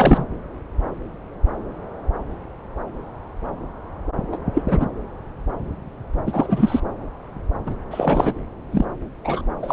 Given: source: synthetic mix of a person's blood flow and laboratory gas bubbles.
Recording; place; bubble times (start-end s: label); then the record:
Doppler ultrasound of blood flow; subclavian vein
0.00-0.24 s: bubbles
4.32-4.38 s: bubbles
4.54-4.62 s: bubbles
4.67-4.86 s: bubbles
6.27-6.80 s: bubbles
7.66-7.75 s: bubbles
7.91-8.33 s: bubbles
8.71-8.85 s: bubbles
9.24-9.41 s: bubbles
9.62-9.73 s: bubbles
From the record:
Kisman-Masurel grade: 223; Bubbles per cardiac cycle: several, 3 to 8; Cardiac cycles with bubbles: 10 to 50%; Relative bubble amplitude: loud (0.450 to 0.775); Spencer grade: 2 (many but less than half of the cardiac periods contain bubble signals, singularly or in groups); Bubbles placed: anywhere in the cardiac cycle